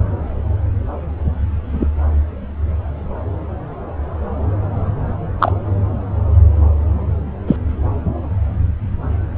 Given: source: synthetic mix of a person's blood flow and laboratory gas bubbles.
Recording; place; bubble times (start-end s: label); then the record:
Doppler ultrasound of blood flow; subclavian vein
1.73-1.88 s: bubbles
5.39-5.52 s: bubbles
7.47-7.56 s: bubbles
From the record:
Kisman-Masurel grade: 123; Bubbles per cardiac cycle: 1 to 2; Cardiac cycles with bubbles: 10 to 50%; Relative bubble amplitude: loud (0.450 to 0.775); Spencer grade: 2 (many but less than half of the cardiac periods contain bubble signals, singularly or in groups); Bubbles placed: anywhere in the cardiac cycle